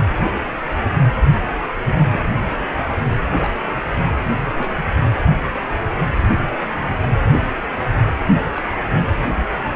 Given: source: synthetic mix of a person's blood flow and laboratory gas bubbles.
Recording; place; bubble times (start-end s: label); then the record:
Doppler ultrasound of blood flow; precordium
2.10-2.21 s: bubbles
3.38-3.54 s: bubbles
4.57-4.71 s: bubbles
8.56-8.62 s: bubbles
From the record:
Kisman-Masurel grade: 121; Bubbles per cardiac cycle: 1 to 2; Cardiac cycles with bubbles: 10 to 50%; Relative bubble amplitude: barely perceptible (0.100 to 0.250); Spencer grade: 2 (many but less than half of the cardiac periods contain bubble signals, singularly or in groups); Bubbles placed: anywhere in the cardiac cycle